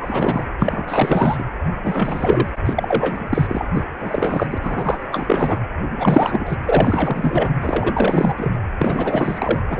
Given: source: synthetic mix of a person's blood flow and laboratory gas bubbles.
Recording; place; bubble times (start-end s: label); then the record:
Doppler ultrasound of blood flow; precordium
0.00-0.44 s: bubbles
0.58-1.44 s: bubbles
1.83-2.62 s: bubbles
2.65-3.71 s: bubbles
3.74-3.83 s: bubbles
4.00-4.46 s: bubbles
4.50-4.58 s: bubbles
4.60-5.04 s: bubbles
5.12-5.59 s: bubbles
5.98-6.56 s: bubbles
6.66-7.54 s: bubbles
7.60-8.55 s: bubbles
8.79-9.60 s: bubbles
9.69-9.80 s: bubbles
From the record:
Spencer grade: 4 (maximum detectable bubble signal sounding continuously throughout systole and diastole of every cardiac period, and overriding the amplitude of the normal cardiac signals); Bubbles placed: anywhere in the cardiac cycle